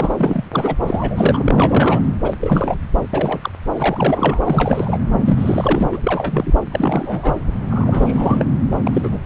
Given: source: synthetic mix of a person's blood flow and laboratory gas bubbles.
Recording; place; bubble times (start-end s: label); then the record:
Doppler ultrasound of blood flow; subclavian vein
0.00-0.11 s: bubbles
0.16-0.75 s: bubbles
0.85-1.43 s: bubbles
1.45-2.01 s: bubbles
2.24-2.34 s: bubbles
2.39-2.78 s: bubbles
3.13-3.50 s: bubbles
3.73-4.98 s: bubbles
5.25-6.54 s: bubbles
6.71-7.35 s: bubbles
7.70-8.45 s: bubbles
8.87-9.18 s: bubbles
From the record:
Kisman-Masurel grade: 342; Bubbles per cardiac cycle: rolling drumbeat, 9 or more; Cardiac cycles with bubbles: 100%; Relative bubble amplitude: moderate (0.250 to 0.450); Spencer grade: 3 (all of the cardiac periods contain showers or single bubble signals, but not dominating or overriding the cardiac motion signals); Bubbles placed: anywhere in the cardiac cycle